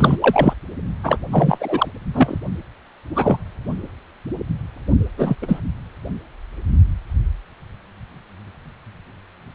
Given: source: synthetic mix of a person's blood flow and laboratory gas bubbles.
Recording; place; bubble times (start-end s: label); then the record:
Doppler ultrasound of blood flow; precordium
0.00-0.17 s: bubbles
0.21-0.54 s: bubbles
1.04-1.18 s: bubbles
1.31-1.89 s: bubbles
2.14-2.38 s: bubbles
3.15-3.39 s: bubbles
5.17-5.35 s: bubbles
5.42-5.60 s: bubbles
From the record:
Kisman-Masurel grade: 233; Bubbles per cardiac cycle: several, 3 to 8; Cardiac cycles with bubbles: 50 to 99%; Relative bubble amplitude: loud (0.450 to 0.775); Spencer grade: 3 (all of the cardiac periods contain showers or single bubble signals, but not dominating or overriding the cardiac motion signals); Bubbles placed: only in the low amplitude regions of the cardiac cycle